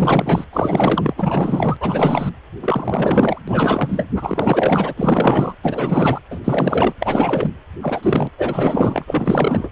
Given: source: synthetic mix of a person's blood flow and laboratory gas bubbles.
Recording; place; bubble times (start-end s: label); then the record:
Doppler ultrasound of blood flow; precordium
0.00-0.44 s: bubbles
0.53-1.14 s: bubbles
1.17-1.77 s: bubbles
1.80-2.29 s: bubbles
2.62-3.42 s: bubbles
3.47-4.04 s: bubbles
4.15-4.94 s: bubbles
4.97-5.55 s: bubbles
5.62-6.21 s: bubbles
6.30-6.39 s: bubbles
6.44-6.94 s: bubbles
7.00-7.50 s: bubbles
7.82-8.29 s: bubbles
8.37-9.70 s: bubbles
From the record:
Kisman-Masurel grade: 444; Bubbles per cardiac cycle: continuous sound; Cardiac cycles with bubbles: 100%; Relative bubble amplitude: maximal (0.775 to 0.999); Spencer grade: 4 (maximum detectable bubble signal sounding continuously throughout systole and diastole of every cardiac period, and overriding the amplitude of the normal cardiac signals); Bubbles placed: anywhere in the cardiac cycle